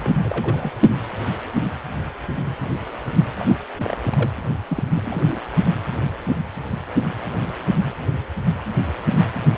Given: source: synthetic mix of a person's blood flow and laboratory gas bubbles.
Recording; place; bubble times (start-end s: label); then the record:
Doppler ultrasound of blood flow; precordium
0.00-0.71 s: bubbles
3.39-3.56 s: bubbles
3.77-4.32 s: bubbles
4.70-4.83 s: bubbles
4.93-5.41 s: bubbles
From the record:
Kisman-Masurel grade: 221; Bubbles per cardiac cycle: several, 3 to 8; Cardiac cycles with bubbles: 10 to 50%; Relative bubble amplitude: barely perceptible (0.100 to 0.250); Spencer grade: 2 (many but less than half of the cardiac periods contain bubble signals, singularly or in groups); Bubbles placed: only in the low amplitude regions of the cardiac cycle